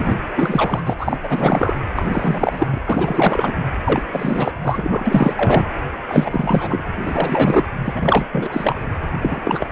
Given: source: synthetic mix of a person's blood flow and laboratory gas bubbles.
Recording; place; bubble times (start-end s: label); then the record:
Doppler ultrasound of blood flow; precordium
0.00-0.16 s: bubbles
0.36-0.83 s: bubbles
0.85-0.94 s: bubbles
0.97-1.18 s: bubbles
1.23-1.75 s: bubbles
1.96-2.79 s: bubbles
2.85-3.56 s: bubbles
3.84-4.05 s: bubbles
4.12-4.51 s: bubbles
4.62-5.70 s: bubbles
6.08-6.83 s: bubbles
6.96-7.64 s: bubbles
7.84-8.29 s: bubbles
8.31-8.79 s: bubbles
9.20-9.41 s: bubbles
9.44-9.71 s: bubbles
From the record:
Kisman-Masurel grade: 444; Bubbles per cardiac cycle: continuous sound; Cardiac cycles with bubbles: 100%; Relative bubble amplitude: maximal (0.775 to 0.999); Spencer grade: 4 (maximum detectable bubble signal sounding continuously throughout systole and diastole of every cardiac period, and overriding the amplitude of the normal cardiac signals); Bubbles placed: anywhere in the cardiac cycle